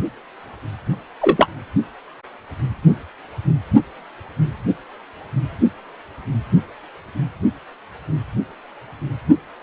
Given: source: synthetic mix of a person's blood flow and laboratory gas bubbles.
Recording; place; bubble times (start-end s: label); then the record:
Doppler ultrasound of blood flow; precordium
1.21-1.48 s: bubbles
From the record:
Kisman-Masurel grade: 113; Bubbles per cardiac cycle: 1 to 2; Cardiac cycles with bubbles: 1 to 10%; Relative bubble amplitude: loud (0.450 to 0.775); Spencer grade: 1 (occasional bubble signal discernible with the cardiac motion signal, with majority of cardiac periods free of bubbles); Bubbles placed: only in the low amplitude regions of the cardiac cycle